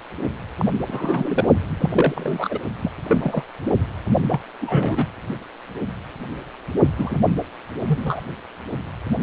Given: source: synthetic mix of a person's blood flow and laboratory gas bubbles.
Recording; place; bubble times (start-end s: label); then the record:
Doppler ultrasound of blood flow; precordium
0.57-0.66 s: bubbles
0.88-1.49 s: bubbles
1.76-2.59 s: bubbles
2.81-2.92 s: bubbles
3.08-3.43 s: bubbles
4.29-4.40 s: bubbles
4.60-5.07 s: bubbles
6.97-7.20 s: bubbles
7.87-8.22 s: bubbles
From the record:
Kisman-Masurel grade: 232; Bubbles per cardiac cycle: several, 3 to 8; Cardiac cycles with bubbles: 50 to 99%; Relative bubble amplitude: moderate (0.250 to 0.450); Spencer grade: 3 (all of the cardiac periods contain showers or single bubble signals, but not dominating or overriding the cardiac motion signals); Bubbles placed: only in the low amplitude regions of the cardiac cycle